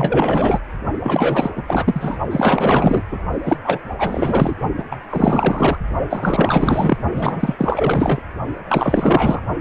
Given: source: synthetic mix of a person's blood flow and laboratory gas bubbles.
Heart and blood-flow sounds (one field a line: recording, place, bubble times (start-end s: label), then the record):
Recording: Doppler ultrasound of blood flow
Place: precordium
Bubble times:
0.00-0.58 s: bubbles
1.00-1.64 s: bubbles
1.68-2.19 s: bubbles
2.30-3.02 s: bubbles
3.11-3.19 s: bubbles
3.45-3.57 s: bubbles
3.64-3.79 s: bubbles
3.99-4.55 s: bubbles
4.78-4.84 s: bubbles
4.91-4.96 s: bubbles
5.09-5.78 s: bubbles
6.09-6.97 s: bubbles
7.12-8.22 s: bubbles
8.69-9.42 s: bubbles
From the record:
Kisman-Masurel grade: 444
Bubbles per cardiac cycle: continuous sound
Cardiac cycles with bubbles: 100%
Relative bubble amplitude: maximal (0.775 to 0.999)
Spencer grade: 4 (maximum detectable bubble signal sounding continuously throughout systole and diastole of every cardiac period, and overriding the amplitude of the normal cardiac signals)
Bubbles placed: only in the low amplitude regions of the cardiac cycle